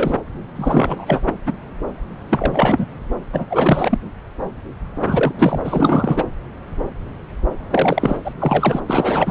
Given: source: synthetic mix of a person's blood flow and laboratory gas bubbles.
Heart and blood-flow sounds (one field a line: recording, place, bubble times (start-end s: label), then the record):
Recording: Doppler ultrasound of blood flow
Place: subclavian vein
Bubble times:
0.00-0.18 s: bubbles
0.56-1.20 s: bubbles
1.46-1.53 s: bubbles
2.30-2.88 s: bubbles
3.32-3.45 s: bubbles
3.50-3.98 s: bubbles
5.06-5.33 s: bubbles
5.37-5.58 s: bubbles
5.64-6.24 s: bubbles
7.71-8.17 s: bubbles
8.25-8.34 s: bubbles
8.38-8.80 s: bubbles
8.86-9.31 s: bubbles
From the record:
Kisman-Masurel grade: 333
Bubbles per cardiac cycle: rolling drumbeat, 9 or more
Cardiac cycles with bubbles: 50 to 99%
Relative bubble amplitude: loud (0.450 to 0.775)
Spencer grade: 3 (all of the cardiac periods contain showers or single bubble signals, but not dominating or overriding the cardiac motion signals)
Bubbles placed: anywhere in the cardiac cycle